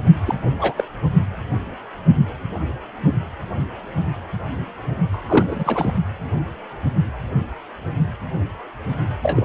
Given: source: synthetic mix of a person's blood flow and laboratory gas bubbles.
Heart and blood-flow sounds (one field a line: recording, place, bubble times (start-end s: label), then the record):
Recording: Doppler ultrasound of blood flow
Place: precordium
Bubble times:
0.26-0.35 s: bubbles
0.59-0.73 s: bubbles
0.76-0.84 s: bubbles
5.10-5.94 s: bubbles
9.21-9.45 s: bubbles
From the record:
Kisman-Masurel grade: 222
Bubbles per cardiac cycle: several, 3 to 8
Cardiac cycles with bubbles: 10 to 50%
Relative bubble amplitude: moderate (0.250 to 0.450)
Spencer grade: 2 (many but less than half of the cardiac periods contain bubble signals, singularly or in groups)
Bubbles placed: only in the low amplitude regions of the cardiac cycle